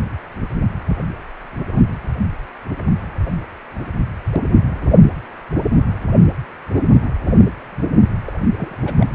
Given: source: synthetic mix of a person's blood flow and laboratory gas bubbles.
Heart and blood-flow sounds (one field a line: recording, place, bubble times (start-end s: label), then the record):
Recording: Doppler ultrasound of blood flow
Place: precordium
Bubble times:
8.27-8.39 s: bubbles
8.58-8.76 s: bubbles
8.85-8.97 s: bubbles
9.00-9.07 s: bubbles
From the record:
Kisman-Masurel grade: 211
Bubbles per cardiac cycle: several, 3 to 8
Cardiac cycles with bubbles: 1 to 10%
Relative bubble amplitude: barely perceptible (0.100 to 0.250)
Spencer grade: 1 (occasional bubble signal discernible with the cardiac motion signal, with majority of cardiac periods free of bubbles)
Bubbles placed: anywhere in the cardiac cycle